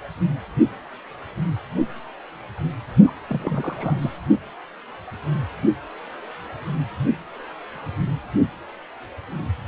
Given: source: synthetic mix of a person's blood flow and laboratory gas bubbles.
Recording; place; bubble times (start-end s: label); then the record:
Doppler ultrasound of blood flow; precordium
3.06-3.11 s: bubbles
3.29-3.98 s: bubbles
4.01-4.19 s: bubbles
From the record:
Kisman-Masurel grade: 221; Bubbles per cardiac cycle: several, 3 to 8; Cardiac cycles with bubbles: 10 to 50%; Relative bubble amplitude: barely perceptible (0.100 to 0.250); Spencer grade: 2 (many but less than half of the cardiac periods contain bubble signals, singularly or in groups); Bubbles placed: only in the low amplitude regions of the cardiac cycle